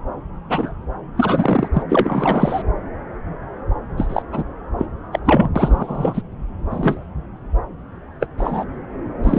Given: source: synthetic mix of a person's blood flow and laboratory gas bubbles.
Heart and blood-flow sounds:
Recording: Doppler ultrasound of blood flow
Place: subclavian vein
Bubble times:
0.49-0.73 s: bubbles
1.17-1.69 s: bubbles
1.73-1.83 s: bubbles
1.89-2.62 s: bubbles
3.97-4.22 s: bubbles
4.31-4.43 s: bubbles
4.78-4.85 s: bubbles
5.11-5.19 s: bubbles
5.25-5.50 s: bubbles
5.55-6.21 s: bubbles
6.71-7.03 s: bubbles
8.21-8.26 s: bubbles
8.38-8.65 s: bubbles
9.23-9.39 s: bubbles
From the record:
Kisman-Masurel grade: 233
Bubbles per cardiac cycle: several, 3 to 8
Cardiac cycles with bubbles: 50 to 99%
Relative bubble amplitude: loud (0.450 to 0.775)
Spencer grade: 3 (all of the cardiac periods contain showers or single bubble signals, but not dominating or overriding the cardiac motion signals)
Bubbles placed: anywhere in the cardiac cycle

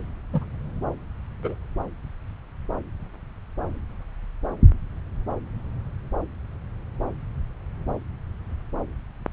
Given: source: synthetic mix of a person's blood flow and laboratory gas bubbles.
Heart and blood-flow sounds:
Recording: Doppler ultrasound of blood flow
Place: subclavian vein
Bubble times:
0.33-0.45 s: bubbles
1.43-1.54 s: bubbles
From the record:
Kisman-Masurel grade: 112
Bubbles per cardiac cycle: 1 to 2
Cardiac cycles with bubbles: 1 to 10%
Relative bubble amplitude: moderate (0.250 to 0.450)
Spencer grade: 1 (occasional bubble signal discernible with the cardiac motion signal, with majority of cardiac periods free of bubbles)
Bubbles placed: anywhere in the cardiac cycle

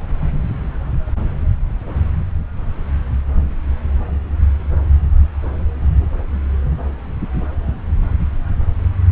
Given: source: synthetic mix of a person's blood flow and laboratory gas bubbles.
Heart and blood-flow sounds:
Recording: Doppler ultrasound of blood flow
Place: subclavian vein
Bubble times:
no bubbles
From the record:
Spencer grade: 0 (complete lack of bubble signals)

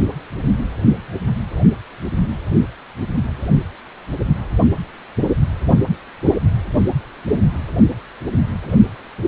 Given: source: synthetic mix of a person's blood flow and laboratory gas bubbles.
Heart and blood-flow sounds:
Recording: Doppler ultrasound of blood flow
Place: precordium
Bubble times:
no bubbles
From the record:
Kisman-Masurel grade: 000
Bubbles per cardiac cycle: 0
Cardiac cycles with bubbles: 0%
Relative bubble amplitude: no bubbles discernible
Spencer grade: 0 (complete lack of bubble signals)

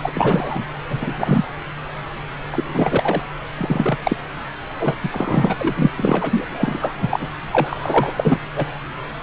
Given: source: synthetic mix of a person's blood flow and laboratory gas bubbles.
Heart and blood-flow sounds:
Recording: Doppler ultrasound of blood flow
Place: subclavian vein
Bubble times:
0.01-0.65 s: bubbles
0.89-1.44 s: bubbles
2.52-3.22 s: bubbles
3.57-4.17 s: bubbles
4.79-4.96 s: bubbles
5.03-5.55 s: bubbles
5.59-5.91 s: bubbles
5.96-6.46 s: bubbles
6.50-7.28 s: bubbles
7.52-8.13 s: bubbles
8.16-8.38 s: bubbles
8.56-8.65 s: bubbles
From the record:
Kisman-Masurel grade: 233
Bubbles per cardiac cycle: several, 3 to 8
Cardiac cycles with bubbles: 50 to 99%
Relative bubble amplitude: loud (0.450 to 0.775)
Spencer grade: 3 (all of the cardiac periods contain showers or single bubble signals, but not dominating or overriding the cardiac motion signals)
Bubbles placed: anywhere in the cardiac cycle

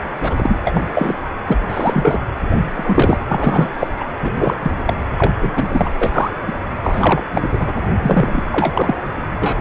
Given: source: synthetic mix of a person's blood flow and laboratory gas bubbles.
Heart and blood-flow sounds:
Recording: Doppler ultrasound of blood flow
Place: precordium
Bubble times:
0.00-0.04 s: bubbles
0.21-0.61 s: bubbles
0.66-0.85 s: bubbles
0.94-1.15 s: bubbles
1.47-1.57 s: bubbles
1.69-2.23 s: bubbles
2.76-3.19 s: bubbles
3.28-3.87 s: bubbles
3.99-4.10 s: bubbles
4.22-4.31 s: bubbles
4.38-4.57 s: bubbles
4.62-4.71 s: bubbles
4.85-4.96 s: bubbles
5.18-5.33 s: bubbles
5.41-5.52 s: bubbles
5.56-5.90 s: bubbles
6.01-6.31 s: bubbles
6.47-6.55 s: bubbles
6.83-7.24 s: bubbles
7.32-7.48 s: bubbles
7.51-7.74 s: bubbles
8.02-8.41 s: bubbles
8.51-8.96 s: bubbles
9.39-9.61 s: bubbles
From the record:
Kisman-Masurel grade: 243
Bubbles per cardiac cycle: several, 3 to 8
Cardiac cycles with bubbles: 100%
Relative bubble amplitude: loud (0.450 to 0.775)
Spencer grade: 3 (all of the cardiac periods contain showers or single bubble signals, but not dominating or overriding the cardiac motion signals)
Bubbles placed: anywhere in the cardiac cycle

